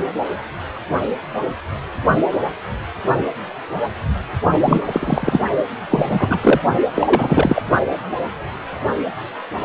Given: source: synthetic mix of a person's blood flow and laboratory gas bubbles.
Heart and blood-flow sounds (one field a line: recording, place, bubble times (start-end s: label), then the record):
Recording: Doppler ultrasound of blood flow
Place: precordium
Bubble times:
4.60-4.82 s: bubbles
4.85-5.41 s: bubbles
5.90-6.39 s: bubbles
6.43-6.61 s: bubbles
6.95-7.62 s: bubbles
From the record:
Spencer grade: 3 (all of the cardiac periods contain showers or single bubble signals, but not dominating or overriding the cardiac motion signals)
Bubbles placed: only in the low amplitude regions of the cardiac cycle